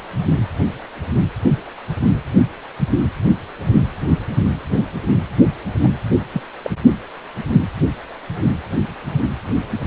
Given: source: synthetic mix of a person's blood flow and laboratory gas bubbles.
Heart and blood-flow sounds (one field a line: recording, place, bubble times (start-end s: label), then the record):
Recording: Doppler ultrasound of blood flow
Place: precordium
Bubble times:
5.80-5.89 s: bubbles
6.33-6.42 s: bubbles
6.63-6.70 s: bubbles
From the record:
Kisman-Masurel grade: 212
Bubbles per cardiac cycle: several, 3 to 8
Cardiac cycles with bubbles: 1 to 10%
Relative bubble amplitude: moderate (0.250 to 0.450)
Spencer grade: 1 (occasional bubble signal discernible with the cardiac motion signal, with majority of cardiac periods free of bubbles)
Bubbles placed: only in the low amplitude regions of the cardiac cycle